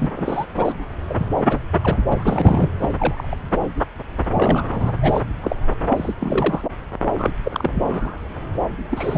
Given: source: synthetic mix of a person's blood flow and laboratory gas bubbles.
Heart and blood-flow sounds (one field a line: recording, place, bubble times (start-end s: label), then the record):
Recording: Doppler ultrasound of blood flow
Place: subclavian vein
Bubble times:
0.00-0.07 s: bubbles
0.16-0.46 s: bubbles
0.57-0.72 s: bubbles
1.09-1.15 s: bubbles
1.17-1.27 s: bubbles
1.48-1.58 s: bubbles
1.82-1.97 s: bubbles
2.09-2.69 s: bubbles
2.79-2.90 s: bubbles
2.98-3.37 s: bubbles
4.33-4.93 s: bubbles
5.02-5.21 s: bubbles
5.43-5.56 s: bubbles
5.71-5.75 s: bubbles
5.89-6.14 s: bubbles
6.20-6.62 s: bubbles
7.17-7.31 s: bubbles
7.44-7.71 s: bubbles
7.75-8.22 s: bubbles
8.90-9.18 s: bubbles
From the record:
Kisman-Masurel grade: 232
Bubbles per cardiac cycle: several, 3 to 8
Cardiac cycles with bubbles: 50 to 99%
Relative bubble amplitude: moderate (0.250 to 0.450)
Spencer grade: 3 (all of the cardiac periods contain showers or single bubble signals, but not dominating or overriding the cardiac motion signals)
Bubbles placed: anywhere in the cardiac cycle